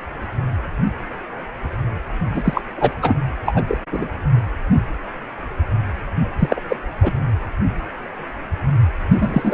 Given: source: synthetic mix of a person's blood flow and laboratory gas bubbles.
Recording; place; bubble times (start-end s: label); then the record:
Doppler ultrasound of blood flow; precordium
2.33-2.62 s: bubbles
2.77-2.96 s: bubbles
3.02-3.14 s: bubbles
3.46-3.64 s: bubbles
3.69-3.77 s: bubbles
3.92-4.08 s: bubbles
6.38-6.60 s: bubbles
6.68-6.76 s: bubbles
7.02-7.11 s: bubbles
9.12-9.54 s: bubbles
From the record:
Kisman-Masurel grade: 223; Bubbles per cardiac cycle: several, 3 to 8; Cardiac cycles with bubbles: 10 to 50%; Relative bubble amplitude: loud (0.450 to 0.775); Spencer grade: 2 (many but less than half of the cardiac periods contain bubble signals, singularly or in groups); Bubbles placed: anywhere in the cardiac cycle